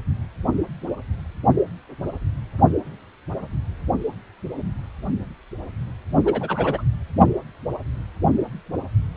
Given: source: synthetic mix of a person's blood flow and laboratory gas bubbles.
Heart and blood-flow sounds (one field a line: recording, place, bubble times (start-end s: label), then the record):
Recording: Doppler ultrasound of blood flow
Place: precordium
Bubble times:
6.25-6.82 s: bubbles
From the record:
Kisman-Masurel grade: 122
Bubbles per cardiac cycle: 1 to 2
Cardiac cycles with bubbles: 10 to 50%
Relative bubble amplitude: moderate (0.250 to 0.450)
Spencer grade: 2 (many but less than half of the cardiac periods contain bubble signals, singularly or in groups)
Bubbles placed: only in the low amplitude regions of the cardiac cycle